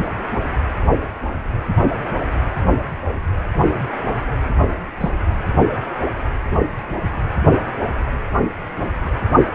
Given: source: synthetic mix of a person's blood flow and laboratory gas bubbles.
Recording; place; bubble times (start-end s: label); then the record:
Doppler ultrasound of blood flow; precordium
5.00-5.10 s: bubbles
From the record:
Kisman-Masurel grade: 112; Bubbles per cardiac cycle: 1 to 2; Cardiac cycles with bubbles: 1 to 10%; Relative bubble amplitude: moderate (0.250 to 0.450); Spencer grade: 1 (occasional bubble signal discernible with the cardiac motion signal, with majority of cardiac periods free of bubbles); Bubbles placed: only in the low amplitude regions of the cardiac cycle